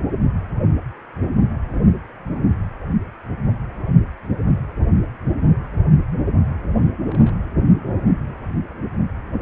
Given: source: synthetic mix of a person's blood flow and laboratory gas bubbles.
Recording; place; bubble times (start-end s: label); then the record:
Doppler ultrasound of blood flow; precordium
1.61-1.74 s: bubbles
2.33-2.41 s: bubbles
7.03-7.34 s: bubbles
From the record:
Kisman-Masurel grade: 121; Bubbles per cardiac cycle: 1 to 2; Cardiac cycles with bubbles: 10 to 50%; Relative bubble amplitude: barely perceptible (0.100 to 0.250); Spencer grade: 2 (many but less than half of the cardiac periods contain bubble signals, singularly or in groups); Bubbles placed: anywhere in the cardiac cycle